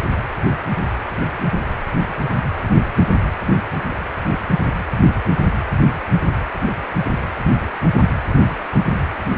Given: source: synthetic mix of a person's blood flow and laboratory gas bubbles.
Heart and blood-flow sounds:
Doppler ultrasound of blood flow; precordium
no bubbles
From the record:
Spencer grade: 0 (complete lack of bubble signals)

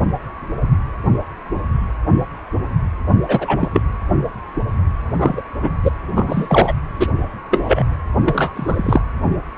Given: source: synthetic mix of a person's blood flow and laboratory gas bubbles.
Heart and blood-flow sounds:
Doppler ultrasound of blood flow; precordium
3.28-3.68 s: bubbles
3.73-3.82 s: bubbles
5.18-5.42 s: bubbles
5.62-5.71 s: bubbles
5.83-5.90 s: bubbles
6.15-6.72 s: bubbles
7.00-7.06 s: bubbles
7.50-7.83 s: bubbles
8.24-8.52 s: bubbles
8.56-9.02 s: bubbles
From the record:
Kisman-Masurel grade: 223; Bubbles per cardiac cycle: several, 3 to 8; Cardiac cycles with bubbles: 10 to 50%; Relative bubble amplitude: loud (0.450 to 0.775); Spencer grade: 2 (many but less than half of the cardiac periods contain bubble signals, singularly or in groups); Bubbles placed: anywhere in the cardiac cycle

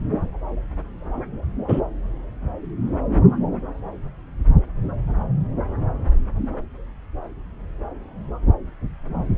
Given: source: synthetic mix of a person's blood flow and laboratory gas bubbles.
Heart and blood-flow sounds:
Doppler ultrasound of blood flow; subclavian vein
1.68-1.80 s: bubbles
From the record:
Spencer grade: 1 (occasional bubble signal discernible with the cardiac motion signal, with majority of cardiac periods free of bubbles); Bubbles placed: anywhere in the cardiac cycle

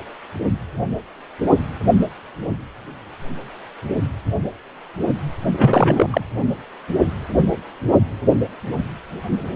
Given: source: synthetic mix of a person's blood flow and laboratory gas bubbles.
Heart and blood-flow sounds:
Doppler ultrasound of blood flow; precordium
5.53-6.21 s: bubbles
From the record:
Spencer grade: 1 (occasional bubble signal discernible with the cardiac motion signal, with majority of cardiac periods free of bubbles); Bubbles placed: anywhere in the cardiac cycle

